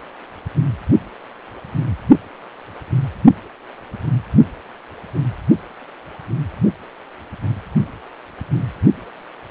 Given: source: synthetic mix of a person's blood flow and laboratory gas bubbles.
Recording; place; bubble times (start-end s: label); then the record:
Doppler ultrasound of blood flow; precordium
no bubbles
From the record:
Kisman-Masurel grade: 000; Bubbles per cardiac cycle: 0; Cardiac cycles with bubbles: 0%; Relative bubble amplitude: no bubbles discernible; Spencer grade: 0 (complete lack of bubble signals)